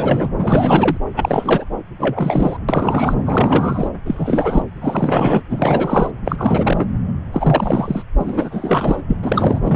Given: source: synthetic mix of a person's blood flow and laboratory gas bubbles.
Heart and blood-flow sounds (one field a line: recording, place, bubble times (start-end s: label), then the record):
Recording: Doppler ultrasound of blood flow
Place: subclavian vein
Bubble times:
0.00-0.29 s: bubbles
0.39-0.97 s: bubbles
1.17-1.65 s: bubbles
1.98-2.57 s: bubbles
2.69-3.14 s: bubbles
3.26-3.88 s: bubbles
4.05-4.62 s: bubbles
4.81-5.42 s: bubbles
5.50-6.11 s: bubbles
6.25-6.85 s: bubbles
7.32-8.03 s: bubbles
8.19-9.02 s: bubbles
9.09-9.17 s: bubbles
9.23-9.59 s: bubbles
9.65-9.76 s: bubbles
From the record:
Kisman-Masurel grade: 343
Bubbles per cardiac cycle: rolling drumbeat, 9 or more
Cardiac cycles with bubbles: 100%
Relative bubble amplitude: loud (0.450 to 0.775)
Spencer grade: 3 (all of the cardiac periods contain showers or single bubble signals, but not dominating or overriding the cardiac motion signals)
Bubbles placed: anywhere in the cardiac cycle